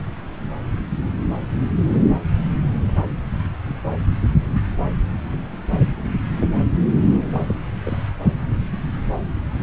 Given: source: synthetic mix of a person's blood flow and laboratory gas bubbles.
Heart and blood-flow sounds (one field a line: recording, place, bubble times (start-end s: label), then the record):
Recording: Doppler ultrasound of blood flow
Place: subclavian vein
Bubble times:
7.34-7.39 s: bubbles
7.48-7.54 s: bubbles
7.86-8.06 s: bubbles
From the record:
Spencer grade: 1 (occasional bubble signal discernible with the cardiac motion signal, with majority of cardiac periods free of bubbles)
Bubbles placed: anywhere in the cardiac cycle